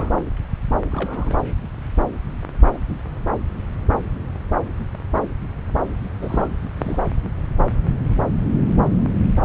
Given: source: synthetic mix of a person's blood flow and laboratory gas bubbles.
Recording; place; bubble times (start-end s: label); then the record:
Doppler ultrasound of blood flow; subclavian vein
0.00-0.18 s: bubbles
0.92-1.42 s: bubbles
2.64-2.78 s: bubbles
6.21-6.48 s: bubbles
6.77-7.04 s: bubbles
From the record:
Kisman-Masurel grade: 221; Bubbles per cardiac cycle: several, 3 to 8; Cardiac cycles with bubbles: 10 to 50%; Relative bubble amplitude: barely perceptible (0.100 to 0.250); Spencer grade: 2 (many but less than half of the cardiac periods contain bubble signals, singularly or in groups); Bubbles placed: anywhere in the cardiac cycle